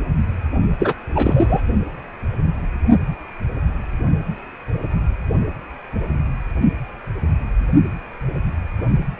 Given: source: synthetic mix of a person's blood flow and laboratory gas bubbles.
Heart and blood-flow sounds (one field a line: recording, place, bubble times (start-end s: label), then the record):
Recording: Doppler ultrasound of blood flow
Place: precordium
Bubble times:
0.79-0.94 s: bubbles
1.15-1.62 s: bubbles
From the record:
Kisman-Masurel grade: 213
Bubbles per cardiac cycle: several, 3 to 8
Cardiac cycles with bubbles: 1 to 10%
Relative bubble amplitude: loud (0.450 to 0.775)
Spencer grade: 1 (occasional bubble signal discernible with the cardiac motion signal, with majority of cardiac periods free of bubbles)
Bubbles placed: only in the low amplitude regions of the cardiac cycle